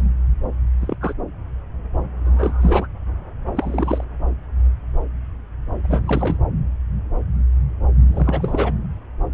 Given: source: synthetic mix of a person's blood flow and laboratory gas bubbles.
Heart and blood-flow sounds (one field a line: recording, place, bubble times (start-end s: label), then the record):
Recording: Doppler ultrasound of blood flow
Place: subclavian vein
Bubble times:
0.81-0.95 s: bubbles
1.01-1.14 s: bubbles
2.25-2.87 s: bubbles
3.55-4.04 s: bubbles
5.83-6.38 s: bubbles
8.13-8.72 s: bubbles
From the record:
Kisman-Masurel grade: 222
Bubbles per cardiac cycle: several, 3 to 8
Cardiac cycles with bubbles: 10 to 50%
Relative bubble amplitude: moderate (0.250 to 0.450)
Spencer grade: 2 (many but less than half of the cardiac periods contain bubble signals, singularly or in groups)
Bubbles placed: anywhere in the cardiac cycle